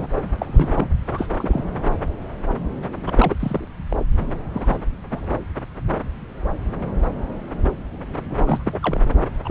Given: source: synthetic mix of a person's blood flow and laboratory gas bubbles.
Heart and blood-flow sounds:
Doppler ultrasound of blood flow; subclavian vein
0.00-0.07 s: bubbles
0.15-0.22 s: bubbles
0.38-0.90 s: bubbles
1.08-1.27 s: bubbles
1.39-1.64 s: bubbles
3.06-3.35 s: bubbles
3.40-3.67 s: bubbles
3.89-3.96 s: bubbles
4.53-4.76 s: bubbles
5.10-5.39 s: bubbles
8.29-8.78 s: bubbles
8.82-9.00 s: bubbles
9.45-9.51 s: bubbles
From the record:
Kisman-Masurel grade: 232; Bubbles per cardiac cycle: several, 3 to 8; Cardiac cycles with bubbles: 50 to 99%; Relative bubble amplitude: moderate (0.250 to 0.450); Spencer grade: 3 (all of the cardiac periods contain showers or single bubble signals, but not dominating or overriding the cardiac motion signals); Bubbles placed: anywhere in the cardiac cycle

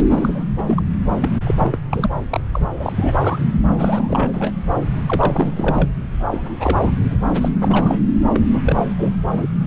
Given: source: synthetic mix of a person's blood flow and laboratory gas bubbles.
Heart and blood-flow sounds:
Doppler ultrasound of blood flow; subclavian vein
0.00-0.44 s: bubbles
0.57-0.62 s: bubbles
0.66-0.82 s: bubbles
1.20-1.29 s: bubbles
1.44-1.78 s: bubbles
1.90-2.10 s: bubbles
2.30-2.41 s: bubbles
2.53-2.65 s: bubbles
2.71-2.95 s: bubbles
2.98-3.15 s: bubbles
3.21-3.39 s: bubbles
3.71-4.52 s: bubbles
5.07-5.88 s: bubbles
6.32-6.54 s: bubbles
6.59-6.92 s: bubbles
7.11-7.18 s: bubbles
7.41-7.49 s: bubbles
7.61-7.99 s: bubbles
8.34-8.40 s: bubbles
8.53-8.61 s: bubbles
8.63-8.85 s: bubbles
8.97-9.13 s: bubbles
9.27-9.48 s: bubbles
From the record:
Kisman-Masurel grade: 342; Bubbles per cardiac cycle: rolling drumbeat, 9 or more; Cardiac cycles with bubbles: 100%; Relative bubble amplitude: moderate (0.250 to 0.450); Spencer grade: 3 (all of the cardiac periods contain showers or single bubble signals, but not dominating or overriding the cardiac motion signals); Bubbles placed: anywhere in the cardiac cycle

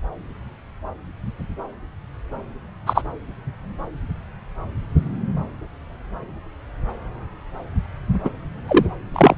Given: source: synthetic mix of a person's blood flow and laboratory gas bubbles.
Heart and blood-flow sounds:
Doppler ultrasound of blood flow; subclavian vein
2.86-3.02 s: bubbles
8.25-8.29 s: bubbles
8.68-8.86 s: bubbles
9.14-9.35 s: bubbles
From the record:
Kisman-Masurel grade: 123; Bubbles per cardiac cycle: 1 to 2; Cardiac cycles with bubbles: 10 to 50%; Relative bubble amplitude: loud (0.450 to 0.775); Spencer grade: 2 (many but less than half of the cardiac periods contain bubble signals, singularly or in groups); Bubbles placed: anywhere in the cardiac cycle

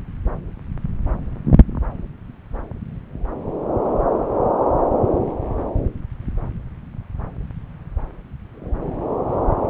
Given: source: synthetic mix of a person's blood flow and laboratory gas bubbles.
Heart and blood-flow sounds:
Doppler ultrasound of blood flow; subclavian vein
no bubbles
From the record:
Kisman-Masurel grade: 000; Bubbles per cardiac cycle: 0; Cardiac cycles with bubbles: 0%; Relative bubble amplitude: no bubbles discernible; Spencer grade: 0 (complete lack of bubble signals)

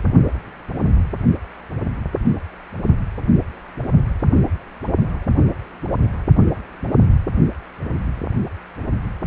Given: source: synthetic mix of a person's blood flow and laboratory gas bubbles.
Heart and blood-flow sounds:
Doppler ultrasound of blood flow; precordium
no bubbles
From the record:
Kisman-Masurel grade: 000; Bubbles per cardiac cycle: 0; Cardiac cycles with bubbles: 0%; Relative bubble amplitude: no bubbles discernible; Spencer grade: 0 (complete lack of bubble signals)

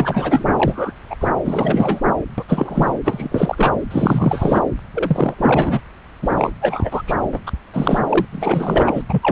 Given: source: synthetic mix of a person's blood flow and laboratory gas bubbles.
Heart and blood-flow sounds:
Doppler ultrasound of blood flow; subclavian vein
0.00-0.92 s: bubbles
1.09-1.16 s: bubbles
1.21-1.28 s: bubbles
1.45-2.00 s: bubbles
2.38-2.43 s: bubbles
2.48-2.94 s: bubbles
3.04-3.73 s: bubbles
3.91-4.63 s: bubbles
4.93-5.34 s: bubbles
5.38-5.80 s: bubbles
6.22-6.51 s: bubbles
6.60-7.03 s: bubbles
7.07-7.17 s: bubbles
7.32-7.39 s: bubbles
7.46-7.51 s: bubbles
7.74-8.01 s: bubbles
8.09-8.25 s: bubbles
8.32-9.03 s: bubbles
9.09-9.32 s: bubbles
From the record:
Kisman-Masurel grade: 343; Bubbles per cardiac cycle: rolling drumbeat, 9 or more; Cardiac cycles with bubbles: 100%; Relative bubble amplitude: loud (0.450 to 0.775); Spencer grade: 3 (all of the cardiac periods contain showers or single bubble signals, but not dominating or overriding the cardiac motion signals); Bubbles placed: anywhere in the cardiac cycle

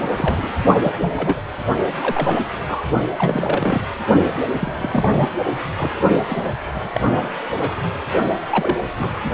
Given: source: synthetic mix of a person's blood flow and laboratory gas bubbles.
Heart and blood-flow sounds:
Doppler ultrasound of blood flow; precordium
0.17-0.61 s: bubbles
0.82-0.92 s: bubbles
1.00-1.41 s: bubbles
2.01-2.40 s: bubbles
2.67-2.83 s: bubbles
3.18-3.81 s: bubbles
4.58-5.29 s: bubbles
5.77-5.91 s: bubbles
6.29-6.52 s: bubbles
6.71-6.90 s: bubbles
6.92-7.00 s: bubbles
7.04-7.31 s: bubbles
7.54-7.72 s: bubbles
8.50-8.78 s: bubbles
8.98-9.10 s: bubbles
From the record:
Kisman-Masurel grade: 242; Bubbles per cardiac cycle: several, 3 to 8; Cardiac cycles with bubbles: 100%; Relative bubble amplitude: moderate (0.250 to 0.450); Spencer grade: 3 (all of the cardiac periods contain showers or single bubble signals, but not dominating or overriding the cardiac motion signals); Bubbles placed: only in the low amplitude regions of the cardiac cycle

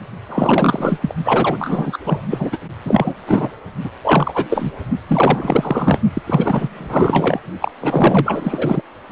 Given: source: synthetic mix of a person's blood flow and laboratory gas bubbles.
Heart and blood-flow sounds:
Doppler ultrasound of blood flow; precordium
0.29-1.15 s: bubbles
1.24-1.98 s: bubbles
2.04-2.21 s: bubbles
2.30-2.58 s: bubbles
2.85-3.14 s: bubbles
3.26-3.51 s: bubbles
3.84-3.90 s: bubbles
4.04-4.47 s: bubbles
4.50-4.72 s: bubbles
5.07-6.00 s: bubbles
6.14-6.22 s: bubbles
6.26-6.69 s: bubbles
6.73-7.40 s: bubbles
7.62-7.72 s: bubbles
7.81-8.81 s: bubbles
From the record:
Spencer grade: 4 (maximum detectable bubble signal sounding continuously throughout systole and diastole of every cardiac period, and overriding the amplitude of the normal cardiac signals); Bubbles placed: only in the low amplitude regions of the cardiac cycle

